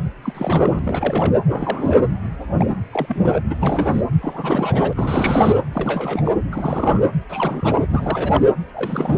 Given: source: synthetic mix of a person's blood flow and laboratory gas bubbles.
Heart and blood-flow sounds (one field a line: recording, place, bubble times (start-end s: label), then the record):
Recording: Doppler ultrasound of blood flow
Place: precordium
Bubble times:
0.00-0.02 s: bubbles
0.22-0.79 s: bubbles
0.84-1.39 s: bubbles
1.47-2.08 s: bubbles
2.57-2.66 s: bubbles
2.92-3.42 s: bubbles
3.50-3.55 s: bubbles
3.61-4.01 s: bubbles
4.21-5.62 s: bubbles
5.73-6.22 s: bubbles
6.25-6.32 s: bubbles
6.51-7.03 s: bubbles
7.29-7.87 s: bubbles
7.94-8.41 s: bubbles
8.73-9.18 s: bubbles
From the record:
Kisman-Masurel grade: 332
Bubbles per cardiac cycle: rolling drumbeat, 9 or more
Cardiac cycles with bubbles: 50 to 99%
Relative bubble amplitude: moderate (0.250 to 0.450)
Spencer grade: 3 (all of the cardiac periods contain showers or single bubble signals, but not dominating or overriding the cardiac motion signals)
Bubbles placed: anywhere in the cardiac cycle